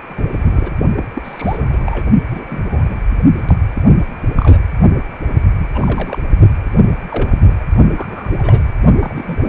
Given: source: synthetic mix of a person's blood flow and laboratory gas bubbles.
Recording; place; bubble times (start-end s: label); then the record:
Doppler ultrasound of blood flow; precordium
0.08-0.76 s: bubbles
0.96-1.08 s: bubbles
1.15-1.22 s: bubbles
1.24-2.08 s: bubbles
2.30-2.96 s: bubbles
3.38-3.54 s: bubbles
3.73-3.83 s: bubbles
4.36-4.63 s: bubbles
5.58-5.67 s: bubbles
5.74-6.20 s: bubbles
6.64-6.69 s: bubbles
6.76-6.83 s: bubbles
7.08-7.41 s: bubbles
7.44-7.52 s: bubbles
7.59-7.63 s: bubbles
7.96-8.29 s: bubbles
8.38-8.62 s: bubbles
8.99-9.38 s: bubbles
9.44-9.48 s: bubbles
From the record:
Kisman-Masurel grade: 242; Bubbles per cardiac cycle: several, 3 to 8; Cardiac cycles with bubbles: 100%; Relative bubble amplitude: moderate (0.250 to 0.450); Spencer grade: 3 (all of the cardiac periods contain showers or single bubble signals, but not dominating or overriding the cardiac motion signals); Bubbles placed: only in the low amplitude regions of the cardiac cycle